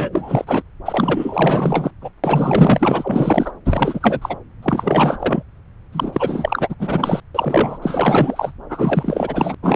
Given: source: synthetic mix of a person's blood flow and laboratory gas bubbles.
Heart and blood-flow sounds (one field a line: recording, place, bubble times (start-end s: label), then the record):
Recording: Doppler ultrasound of blood flow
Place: subclavian vein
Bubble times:
0.00-0.62 s: bubbles
0.85-1.91 s: bubbles
2.02-2.10 s: bubbles
2.23-3.52 s: bubbles
3.65-4.36 s: bubbles
4.62-5.43 s: bubbles
5.92-6.75 s: bubbles
6.79-7.20 s: bubbles
7.35-7.78 s: bubbles
7.82-8.53 s: bubbles
8.69-9.54 s: bubbles
9.62-9.76 s: bubbles
From the record:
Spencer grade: 4 (maximum detectable bubble signal sounding continuously throughout systole and diastole of every cardiac period, and overriding the amplitude of the normal cardiac signals)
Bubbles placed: anywhere in the cardiac cycle